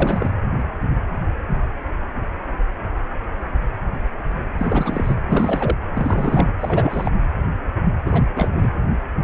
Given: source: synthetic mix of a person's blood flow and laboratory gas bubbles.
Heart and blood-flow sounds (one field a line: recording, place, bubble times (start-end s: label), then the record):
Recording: Doppler ultrasound of blood flow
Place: precordium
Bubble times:
0.00-0.30 s: bubbles
4.58-5.15 s: bubbles
5.28-5.75 s: bubbles
5.93-6.51 s: bubbles
6.61-7.11 s: bubbles
8.05-8.27 s: bubbles
8.34-8.48 s: bubbles
8.55-8.70 s: bubbles
From the record:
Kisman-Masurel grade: 332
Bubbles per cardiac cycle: rolling drumbeat, 9 or more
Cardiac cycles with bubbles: 50 to 99%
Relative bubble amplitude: moderate (0.250 to 0.450)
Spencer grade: 3 (all of the cardiac periods contain showers or single bubble signals, but not dominating or overriding the cardiac motion signals)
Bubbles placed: anywhere in the cardiac cycle